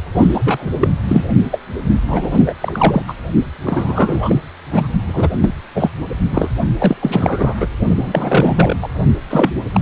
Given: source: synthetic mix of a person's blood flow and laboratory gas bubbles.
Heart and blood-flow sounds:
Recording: Doppler ultrasound of blood flow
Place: precordium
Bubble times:
0.14-0.70 s: bubbles
0.81-0.89 s: bubbles
1.07-1.24 s: bubbles
1.51-1.59 s: bubbles
2.08-2.54 s: bubbles
2.60-3.02 s: bubbles
3.08-3.14 s: bubbles
3.64-4.42 s: bubbles
4.70-4.88 s: bubbles
5.06-5.30 s: bubbles
5.40-5.54 s: bubbles
5.75-5.89 s: bubbles
6.32-6.48 s: bubbles
6.79-6.96 s: bubbles
7.01-7.54 s: bubbles
7.60-7.69 s: bubbles
7.87-8.76 s: bubbles
8.82-8.88 s: bubbles
9.30-9.51 s: bubbles
9.73-9.80 s: bubbles
From the record:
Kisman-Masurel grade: 343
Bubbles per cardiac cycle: rolling drumbeat, 9 or more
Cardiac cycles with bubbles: 100%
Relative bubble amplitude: loud (0.450 to 0.775)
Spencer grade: 3 (all of the cardiac periods contain showers or single bubble signals, but not dominating or overriding the cardiac motion signals)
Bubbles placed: only in the low amplitude regions of the cardiac cycle

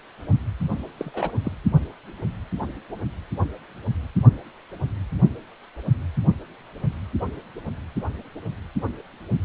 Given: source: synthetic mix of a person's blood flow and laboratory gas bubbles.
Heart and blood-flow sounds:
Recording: Doppler ultrasound of blood flow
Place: precordium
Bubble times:
0.99-1.11 s: bubbles
1.14-1.31 s: bubbles
1.43-1.52 s: bubbles
From the record:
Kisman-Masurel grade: 221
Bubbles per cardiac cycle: several, 3 to 8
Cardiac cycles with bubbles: 10 to 50%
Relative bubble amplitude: barely perceptible (0.100 to 0.250)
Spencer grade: 2 (many but less than half of the cardiac periods contain bubble signals, singularly or in groups)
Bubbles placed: only in the low amplitude regions of the cardiac cycle

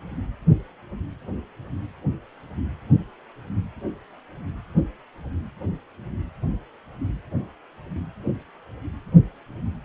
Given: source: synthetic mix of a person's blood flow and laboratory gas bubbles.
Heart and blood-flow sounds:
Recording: Doppler ultrasound of blood flow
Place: precordium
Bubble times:
no bubbles
From the record:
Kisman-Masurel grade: 000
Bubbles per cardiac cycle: 0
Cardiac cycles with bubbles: 0%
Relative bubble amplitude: no bubbles discernible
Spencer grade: 0 (complete lack of bubble signals)

